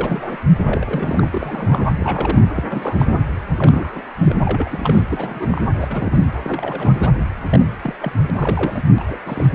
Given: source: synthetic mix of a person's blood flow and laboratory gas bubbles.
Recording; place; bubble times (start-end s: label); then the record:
Doppler ultrasound of blood flow; precordium
0.00-0.38 s: bubbles
0.61-1.86 s: bubbles
1.96-2.42 s: bubbles
2.56-3.15 s: bubbles
3.56-4.05 s: bubbles
4.18-4.34 s: bubbles
4.44-5.06 s: bubbles
5.10-5.62 s: bubbles
5.74-6.20 s: bubbles
6.42-7.08 s: bubbles
7.50-7.67 s: bubbles
7.83-7.95 s: bubbles
8.01-8.12 s: bubbles
8.21-8.30 s: bubbles
8.34-8.84 s: bubbles
8.98-9.04 s: bubbles
9.07-9.20 s: bubbles
9.24-9.50 s: bubbles
From the record:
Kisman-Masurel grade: 342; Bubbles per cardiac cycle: rolling drumbeat, 9 or more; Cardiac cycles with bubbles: 100%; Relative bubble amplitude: moderate (0.250 to 0.450); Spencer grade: 3 (all of the cardiac periods contain showers or single bubble signals, but not dominating or overriding the cardiac motion signals); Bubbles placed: anywhere in the cardiac cycle